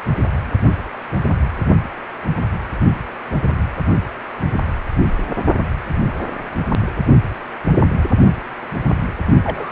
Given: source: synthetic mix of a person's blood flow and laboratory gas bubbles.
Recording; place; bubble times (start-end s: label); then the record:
Doppler ultrasound of blood flow; precordium
9.44-9.72 s: bubbles
From the record:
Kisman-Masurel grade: 212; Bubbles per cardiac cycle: several, 3 to 8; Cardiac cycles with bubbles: 1 to 10%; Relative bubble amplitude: moderate (0.250 to 0.450); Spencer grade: 1 (occasional bubble signal discernible with the cardiac motion signal, with majority of cardiac periods free of bubbles); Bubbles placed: only in the low amplitude regions of the cardiac cycle